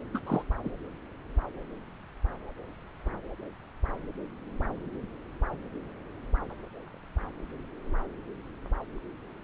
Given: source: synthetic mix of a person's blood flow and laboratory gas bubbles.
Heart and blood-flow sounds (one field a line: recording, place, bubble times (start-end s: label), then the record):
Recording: Doppler ultrasound of blood flow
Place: subclavian vein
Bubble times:
0.13-0.19 s: bubbles
0.27-0.43 s: bubbles
0.64-0.68 s: bubbles
From the record:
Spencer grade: 1 (occasional bubble signal discernible with the cardiac motion signal, with majority of cardiac periods free of bubbles)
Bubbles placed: anywhere in the cardiac cycle